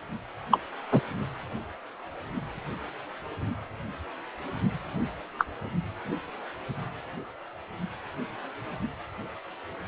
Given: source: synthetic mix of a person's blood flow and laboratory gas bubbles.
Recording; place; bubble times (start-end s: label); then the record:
Doppler ultrasound of blood flow; precordium
0.51-0.59 s: bubbles
0.91-1.01 s: bubbles
5.38-5.45 s: bubbles
From the record:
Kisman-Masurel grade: 123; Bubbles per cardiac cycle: 1 to 2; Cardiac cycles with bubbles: 10 to 50%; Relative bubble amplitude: loud (0.450 to 0.775); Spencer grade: 2 (many but less than half of the cardiac periods contain bubble signals, singularly or in groups); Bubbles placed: anywhere in the cardiac cycle